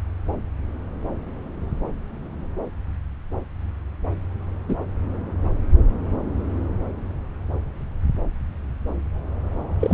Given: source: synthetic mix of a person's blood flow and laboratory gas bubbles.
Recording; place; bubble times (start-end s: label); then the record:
Doppler ultrasound of blood flow; subclavian vein
4.68-4.75 s: bubbles
9.80-9.94 s: bubbles
From the record:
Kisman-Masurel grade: 123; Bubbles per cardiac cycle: 1 to 2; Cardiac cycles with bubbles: 10 to 50%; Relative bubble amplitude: loud (0.450 to 0.775); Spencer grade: 2 (many but less than half of the cardiac periods contain bubble signals, singularly or in groups); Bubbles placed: anywhere in the cardiac cycle